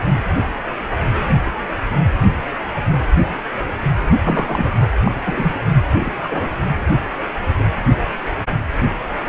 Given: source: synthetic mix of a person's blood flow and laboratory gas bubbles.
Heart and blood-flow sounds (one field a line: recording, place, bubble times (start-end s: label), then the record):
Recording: Doppler ultrasound of blood flow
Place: precordium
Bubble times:
4.11-4.88 s: bubbles
5.04-5.12 s: bubbles
5.25-5.58 s: bubbles
5.91-6.16 s: bubbles
6.23-6.50 s: bubbles
From the record:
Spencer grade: 2 (many but less than half of the cardiac periods contain bubble signals, singularly or in groups)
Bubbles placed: anywhere in the cardiac cycle